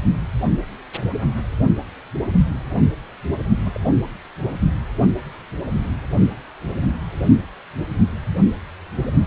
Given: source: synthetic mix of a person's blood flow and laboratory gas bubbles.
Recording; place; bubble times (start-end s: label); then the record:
Doppler ultrasound of blood flow; precordium
3.65-3.77 s: bubbles
From the record:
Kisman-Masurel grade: 111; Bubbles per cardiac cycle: 1 to 2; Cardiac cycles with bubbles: 1 to 10%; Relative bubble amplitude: barely perceptible (0.100 to 0.250); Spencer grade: 1 (occasional bubble signal discernible with the cardiac motion signal, with majority of cardiac periods free of bubbles); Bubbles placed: only in the low amplitude regions of the cardiac cycle